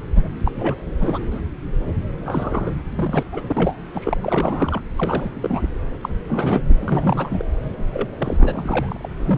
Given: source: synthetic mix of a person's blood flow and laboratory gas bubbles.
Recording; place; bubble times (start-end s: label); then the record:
Doppler ultrasound of blood flow; subclavian vein
0.15-0.22 s: bubbles
0.45-0.75 s: bubbles
1.00-1.19 s: bubbles
1.31-1.41 s: bubbles
2.25-2.71 s: bubbles
2.95-3.24 s: bubbles
3.32-3.41 s: bubbles
3.48-3.88 s: bubbles
3.94-4.18 s: bubbles
4.23-4.81 s: bubbles
4.96-5.63 s: bubbles
6.03-6.09 s: bubbles
6.28-6.62 s: bubbles
6.69-6.74 s: bubbles
6.81-7.43 s: bubbles
7.91-8.16 s: bubbles
8.18-9.09 s: bubbles
9.18-9.38 s: bubbles
From the record:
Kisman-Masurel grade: 332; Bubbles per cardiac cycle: rolling drumbeat, 9 or more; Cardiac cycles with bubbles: 50 to 99%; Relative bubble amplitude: moderate (0.250 to 0.450); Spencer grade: 3 (all of the cardiac periods contain showers or single bubble signals, but not dominating or overriding the cardiac motion signals); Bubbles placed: anywhere in the cardiac cycle